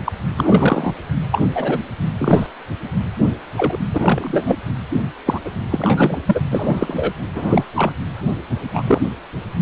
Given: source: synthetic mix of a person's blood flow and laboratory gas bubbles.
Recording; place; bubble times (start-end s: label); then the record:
Doppler ultrasound of blood flow; precordium
0.05-0.12 s: bubbles
0.37-0.94 s: bubbles
1.31-1.43 s: bubbles
1.54-1.79 s: bubbles
2.17-2.46 s: bubbles
3.18-3.28 s: bubbles
3.57-3.79 s: bubbles
3.94-4.57 s: bubbles
5.26-5.40 s: bubbles
5.45-5.51 s: bubbles
5.70-6.19 s: bubbles
6.26-6.41 s: bubbles
6.50-7.12 s: bubbles
7.34-7.64 s: bubbles
7.76-7.92 s: bubbles
8.73-8.84 s: bubbles
8.87-9.01 s: bubbles
From the record:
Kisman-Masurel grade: 243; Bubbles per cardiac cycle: several, 3 to 8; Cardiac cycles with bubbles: 100%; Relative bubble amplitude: loud (0.450 to 0.775); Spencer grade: 3 (all of the cardiac periods contain showers or single bubble signals, but not dominating or overriding the cardiac motion signals); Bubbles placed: anywhere in the cardiac cycle